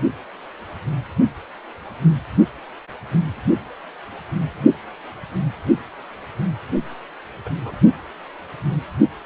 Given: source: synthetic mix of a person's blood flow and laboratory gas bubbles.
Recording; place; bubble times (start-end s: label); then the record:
Doppler ultrasound of blood flow; precordium
7.46-7.50 s: bubbles
7.65-7.75 s: bubbles
From the record:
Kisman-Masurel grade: 111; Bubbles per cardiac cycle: 1 to 2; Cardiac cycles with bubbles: 1 to 10%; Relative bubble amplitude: barely perceptible (0.100 to 0.250); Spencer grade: 1 (occasional bubble signal discernible with the cardiac motion signal, with majority of cardiac periods free of bubbles); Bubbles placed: only in the low amplitude regions of the cardiac cycle